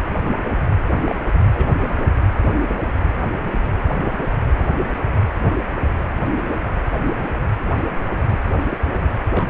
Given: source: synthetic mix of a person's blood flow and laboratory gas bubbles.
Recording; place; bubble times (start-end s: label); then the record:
Doppler ultrasound of blood flow; precordium
1.05-1.15 s: bubbles
1.53-1.69 s: bubbles
8.69-8.79 s: bubbles
9.36-9.44 s: bubbles
From the record:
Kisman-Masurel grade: 121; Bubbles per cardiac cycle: 1 to 2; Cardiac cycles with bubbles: 10 to 50%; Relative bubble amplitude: barely perceptible (0.100 to 0.250); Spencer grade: 2 (many but less than half of the cardiac periods contain bubble signals, singularly or in groups); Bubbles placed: anywhere in the cardiac cycle